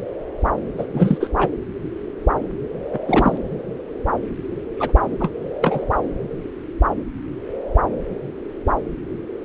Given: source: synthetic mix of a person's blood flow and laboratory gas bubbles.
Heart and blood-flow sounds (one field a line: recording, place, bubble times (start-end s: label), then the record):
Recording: Doppler ultrasound of blood flow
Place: subclavian vein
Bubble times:
0.78-0.86 s: bubbles
0.93-1.28 s: bubbles
1.38-1.48 s: bubbles
2.93-2.99 s: bubbles
3.08-3.38 s: bubbles
4.78-4.91 s: bubbles
5.20-5.30 s: bubbles
5.61-5.85 s: bubbles
From the record:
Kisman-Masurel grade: 222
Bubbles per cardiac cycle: several, 3 to 8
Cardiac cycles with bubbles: 10 to 50%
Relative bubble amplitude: moderate (0.250 to 0.450)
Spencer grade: 2 (many but less than half of the cardiac periods contain bubble signals, singularly or in groups)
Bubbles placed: anywhere in the cardiac cycle